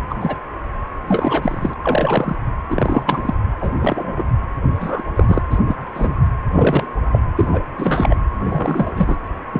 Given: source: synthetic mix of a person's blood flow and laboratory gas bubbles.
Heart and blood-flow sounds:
Doppler ultrasound of blood flow; precordium
0.09-0.15 s: bubbles
0.20-0.37 s: bubbles
1.06-1.74 s: bubbles
1.82-2.36 s: bubbles
2.70-3.04 s: bubbles
3.07-3.34 s: bubbles
3.60-3.73 s: bubbles
3.81-4.25 s: bubbles
4.75-5.04 s: bubbles
5.15-5.42 s: bubbles
5.50-5.58 s: bubbles
5.67-5.75 s: bubbles
5.94-6.15 s: bubbles
6.53-6.86 s: bubbles
7.11-7.19 s: bubbles
7.36-7.48 s: bubbles
7.51-7.64 s: bubbles
7.78-8.16 s: bubbles
8.44-9.18 s: bubbles
9.53-9.60 s: bubbles
From the record:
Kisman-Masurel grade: 243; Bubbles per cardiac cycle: several, 3 to 8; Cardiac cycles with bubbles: 100%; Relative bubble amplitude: loud (0.450 to 0.775); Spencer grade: 3 (all of the cardiac periods contain showers or single bubble signals, but not dominating or overriding the cardiac motion signals); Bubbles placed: anywhere in the cardiac cycle

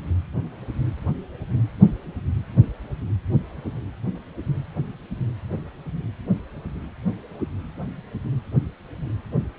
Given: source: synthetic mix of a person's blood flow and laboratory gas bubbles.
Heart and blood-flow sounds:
Doppler ultrasound of blood flow; precordium
no bubbles
From the record:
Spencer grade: 0 (complete lack of bubble signals)

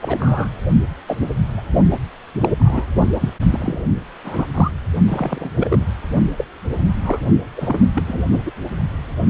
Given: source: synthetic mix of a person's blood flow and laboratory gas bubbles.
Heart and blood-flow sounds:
Doppler ultrasound of blood flow; precordium
0.01-0.49 s: bubbles
1.07-1.17 s: bubbles
1.58-1.62 s: bubbles
1.90-1.99 s: bubbles
2.40-2.48 s: bubbles
2.58-2.85 s: bubbles
3.12-3.18 s: bubbles
3.21-3.33 s: bubbles
3.51-3.82 s: bubbles
4.24-4.46 s: bubbles
4.54-4.72 s: bubbles
5.08-5.50 s: bubbles
5.54-5.86 s: bubbles
6.38-6.46 s: bubbles
7.03-7.19 s: bubbles
7.56-7.87 s: bubbles
7.95-8.03 s: bubbles
8.07-8.25 s: bubbles
8.32-8.38 s: bubbles
8.46-8.52 s: bubbles
9.28-9.30 s: bubbles
From the record:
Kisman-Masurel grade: 242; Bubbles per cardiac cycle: several, 3 to 8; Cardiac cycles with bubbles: 100%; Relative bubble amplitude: moderate (0.250 to 0.450); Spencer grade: 3 (all of the cardiac periods contain showers or single bubble signals, but not dominating or overriding the cardiac motion signals); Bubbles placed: only in the low amplitude regions of the cardiac cycle

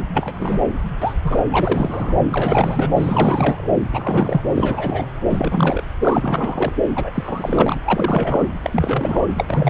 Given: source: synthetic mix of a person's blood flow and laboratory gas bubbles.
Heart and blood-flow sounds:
Doppler ultrasound of blood flow; subclavian vein
0.14-0.61 s: bubbles
1.02-1.14 s: bubbles
1.23-1.38 s: bubbles
1.51-2.15 s: bubbles
2.32-2.90 s: bubbles
2.96-3.72 s: bubbles
3.91-4.41 s: bubbles
4.55-5.07 s: bubbles
5.29-5.83 s: bubbles
6.02-6.72 s: bubbles
6.95-7.76 s: bubbles
7.84-8.49 s: bubbles
8.62-9.27 s: bubbles
9.37-9.44 s: bubbles
9.47-9.70 s: bubbles
From the record:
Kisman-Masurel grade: 342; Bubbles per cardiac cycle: rolling drumbeat, 9 or more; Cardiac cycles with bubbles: 100%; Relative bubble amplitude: moderate (0.250 to 0.450); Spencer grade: 3 (all of the cardiac periods contain showers or single bubble signals, but not dominating or overriding the cardiac motion signals); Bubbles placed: anywhere in the cardiac cycle

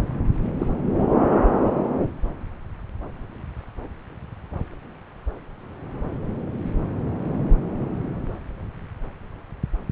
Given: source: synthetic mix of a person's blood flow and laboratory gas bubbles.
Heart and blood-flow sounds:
Doppler ultrasound of blood flow; subclavian vein
0.59-0.66 s: bubbles
From the record:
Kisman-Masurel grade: 113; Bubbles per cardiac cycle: 1 to 2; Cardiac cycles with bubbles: 1 to 10%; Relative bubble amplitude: loud (0.450 to 0.775); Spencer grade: 1 (occasional bubble signal discernible with the cardiac motion signal, with majority of cardiac periods free of bubbles); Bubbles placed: anywhere in the cardiac cycle

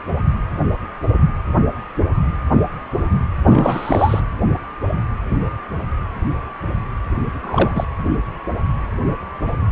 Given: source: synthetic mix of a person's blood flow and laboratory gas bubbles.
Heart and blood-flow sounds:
Doppler ultrasound of blood flow; precordium
3.46-4.20 s: bubbles
7.42-7.85 s: bubbles
From the record:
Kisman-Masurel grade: 212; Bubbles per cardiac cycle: several, 3 to 8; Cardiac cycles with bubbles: 1 to 10%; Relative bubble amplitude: moderate (0.250 to 0.450); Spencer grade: 1 (occasional bubble signal discernible with the cardiac motion signal, with majority of cardiac periods free of bubbles); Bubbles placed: anywhere in the cardiac cycle

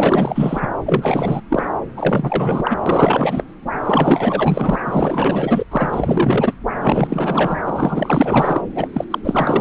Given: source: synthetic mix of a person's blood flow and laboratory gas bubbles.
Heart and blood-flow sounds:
Doppler ultrasound of blood flow; subclavian vein
0.00-0.68 s: bubbles
0.85-1.41 s: bubbles
1.49-1.65 s: bubbles
1.96-2.78 s: bubbles
2.86-3.43 s: bubbles
3.83-4.76 s: bubbles
4.86-5.64 s: bubbles
5.71-6.54 s: bubbles
6.81-7.58 s: bubbles
7.65-8.62 s: bubbles
8.75-8.88 s: bubbles
8.94-9.04 s: bubbles
9.10-9.19 s: bubbles
9.23-9.61 s: bubbles
From the record:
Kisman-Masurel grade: 444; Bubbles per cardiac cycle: continuous sound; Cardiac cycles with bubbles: 100%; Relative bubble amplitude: maximal (0.775 to 0.999); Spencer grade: 4 (maximum detectable bubble signal sounding continuously throughout systole and diastole of every cardiac period, and overriding the amplitude of the normal cardiac signals); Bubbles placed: anywhere in the cardiac cycle

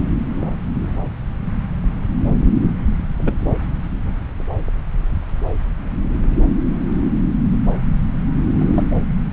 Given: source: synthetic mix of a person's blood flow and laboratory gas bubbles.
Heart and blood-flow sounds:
Doppler ultrasound of blood flow; subclavian vein
3.18-3.35 s: bubbles
8.59-8.84 s: bubbles
8.91-8.96 s: bubbles
From the record:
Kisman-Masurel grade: 211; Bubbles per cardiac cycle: several, 3 to 8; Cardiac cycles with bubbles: 1 to 10%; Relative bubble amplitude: barely perceptible (0.100 to 0.250); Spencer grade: 1 (occasional bubble signal discernible with the cardiac motion signal, with majority of cardiac periods free of bubbles); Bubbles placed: anywhere in the cardiac cycle

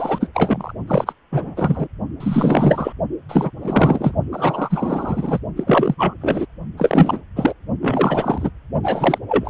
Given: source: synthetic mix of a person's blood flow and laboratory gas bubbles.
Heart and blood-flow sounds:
Doppler ultrasound of blood flow; precordium
0.00-0.28 s: bubbles
0.34-0.72 s: bubbles
0.87-1.12 s: bubbles
1.32-1.88 s: bubbles
2.20-2.92 s: bubbles
3.28-3.50 s: bubbles
3.62-4.12 s: bubbles
4.31-5.39 s: bubbles
5.56-5.95 s: bubbles
5.97-6.14 s: bubbles
6.21-6.46 s: bubbles
6.77-7.21 s: bubbles
7.35-7.53 s: bubbles
7.81-8.50 s: bubbles
8.82-9.18 s: bubbles
9.29-9.50 s: bubbles
From the record:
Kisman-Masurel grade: 343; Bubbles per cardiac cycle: rolling drumbeat, 9 or more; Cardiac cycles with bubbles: 100%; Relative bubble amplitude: loud (0.450 to 0.775); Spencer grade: 3 (all of the cardiac periods contain showers or single bubble signals, but not dominating or overriding the cardiac motion signals); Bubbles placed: only in the low amplitude regions of the cardiac cycle

